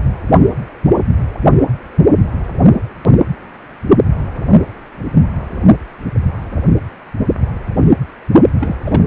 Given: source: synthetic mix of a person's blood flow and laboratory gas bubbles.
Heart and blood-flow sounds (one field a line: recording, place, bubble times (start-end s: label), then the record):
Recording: Doppler ultrasound of blood flow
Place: precordium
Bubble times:
8.60-8.75 s: bubbles
8.81-9.07 s: bubbles
From the record:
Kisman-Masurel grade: 212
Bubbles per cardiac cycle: several, 3 to 8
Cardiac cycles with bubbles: 1 to 10%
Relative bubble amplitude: moderate (0.250 to 0.450)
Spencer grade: 1 (occasional bubble signal discernible with the cardiac motion signal, with majority of cardiac periods free of bubbles)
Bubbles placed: only in the low amplitude regions of the cardiac cycle